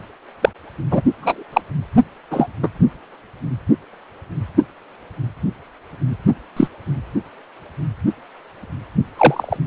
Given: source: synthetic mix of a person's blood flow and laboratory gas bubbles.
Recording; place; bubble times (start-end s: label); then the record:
Doppler ultrasound of blood flow; precordium
0.42-0.49 s: bubbles
0.91-1.02 s: bubbles
1.21-1.43 s: bubbles
1.53-1.61 s: bubbles
2.30-2.47 s: bubbles
2.62-2.68 s: bubbles
6.57-6.67 s: bubbles
9.17-9.57 s: bubbles
From the record:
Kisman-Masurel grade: 123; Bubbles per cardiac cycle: 1 to 2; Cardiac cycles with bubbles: 10 to 50%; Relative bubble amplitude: loud (0.450 to 0.775); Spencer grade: 2 (many but less than half of the cardiac periods contain bubble signals, singularly or in groups); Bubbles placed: only in the low amplitude regions of the cardiac cycle